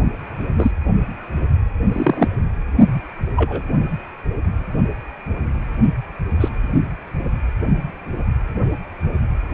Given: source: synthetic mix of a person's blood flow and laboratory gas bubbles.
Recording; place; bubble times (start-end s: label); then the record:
Doppler ultrasound of blood flow; precordium
0.57-0.71 s: bubbles
1.93-2.28 s: bubbles
3.35-3.63 s: bubbles
6.40-6.49 s: bubbles
From the record:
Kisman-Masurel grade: 123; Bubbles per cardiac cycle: 1 to 2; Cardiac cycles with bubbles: 10 to 50%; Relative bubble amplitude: loud (0.450 to 0.775); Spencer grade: 2 (many but less than half of the cardiac periods contain bubble signals, singularly or in groups); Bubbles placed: only in the low amplitude regions of the cardiac cycle